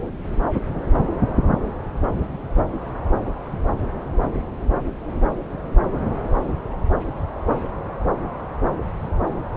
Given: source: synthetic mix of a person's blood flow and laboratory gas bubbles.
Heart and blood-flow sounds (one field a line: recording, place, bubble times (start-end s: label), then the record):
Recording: Doppler ultrasound of blood flow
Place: subclavian vein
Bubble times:
no bubbles
From the record:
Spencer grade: 0 (complete lack of bubble signals)